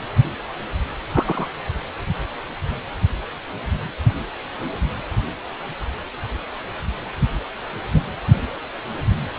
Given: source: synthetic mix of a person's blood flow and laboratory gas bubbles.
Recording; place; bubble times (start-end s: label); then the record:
Doppler ultrasound of blood flow; precordium
1.12-1.49 s: bubbles
7.92-8.03 s: bubbles
From the record:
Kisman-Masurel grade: 113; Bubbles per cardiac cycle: 1 to 2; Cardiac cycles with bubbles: 1 to 10%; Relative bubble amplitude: loud (0.450 to 0.775); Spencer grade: 1 (occasional bubble signal discernible with the cardiac motion signal, with majority of cardiac periods free of bubbles); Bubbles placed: only in the low amplitude regions of the cardiac cycle